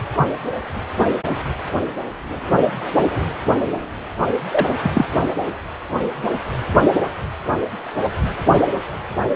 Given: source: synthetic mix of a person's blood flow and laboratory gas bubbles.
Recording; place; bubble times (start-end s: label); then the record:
Doppler ultrasound of blood flow; precordium
4.51-4.66 s: bubbles
4.68-4.75 s: bubbles
4.83-4.91 s: bubbles
4.93-5.05 s: bubbles
From the record:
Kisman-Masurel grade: 212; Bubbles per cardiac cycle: several, 3 to 8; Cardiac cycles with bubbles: 1 to 10%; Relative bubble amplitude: moderate (0.250 to 0.450); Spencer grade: 1 (occasional bubble signal discernible with the cardiac motion signal, with majority of cardiac periods free of bubbles); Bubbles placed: anywhere in the cardiac cycle